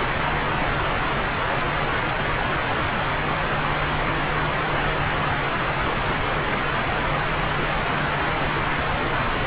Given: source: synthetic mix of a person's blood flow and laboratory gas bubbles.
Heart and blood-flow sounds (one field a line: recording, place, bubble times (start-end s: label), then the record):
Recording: Doppler ultrasound of blood flow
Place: subclavian vein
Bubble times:
no bubbles
From the record:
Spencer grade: 0 (complete lack of bubble signals)